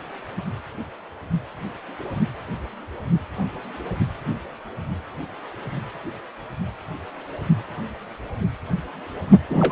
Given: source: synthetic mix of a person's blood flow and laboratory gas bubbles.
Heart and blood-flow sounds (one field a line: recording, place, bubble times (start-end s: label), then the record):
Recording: Doppler ultrasound of blood flow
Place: precordium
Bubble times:
9.50-9.72 s: bubbles
From the record:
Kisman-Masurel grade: 223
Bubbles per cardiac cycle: several, 3 to 8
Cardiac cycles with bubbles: 10 to 50%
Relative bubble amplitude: loud (0.450 to 0.775)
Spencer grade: 2 (many but less than half of the cardiac periods contain bubble signals, singularly or in groups)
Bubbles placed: only in the low amplitude regions of the cardiac cycle